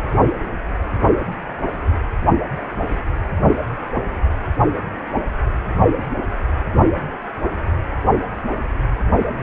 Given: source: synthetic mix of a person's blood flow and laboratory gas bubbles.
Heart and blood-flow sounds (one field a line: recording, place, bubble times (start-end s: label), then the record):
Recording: Doppler ultrasound of blood flow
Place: precordium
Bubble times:
9.19-9.41 s: bubbles
From the record:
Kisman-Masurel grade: 211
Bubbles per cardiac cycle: several, 3 to 8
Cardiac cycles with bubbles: 1 to 10%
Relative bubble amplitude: barely perceptible (0.100 to 0.250)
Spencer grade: 1 (occasional bubble signal discernible with the cardiac motion signal, with majority of cardiac periods free of bubbles)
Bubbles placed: anywhere in the cardiac cycle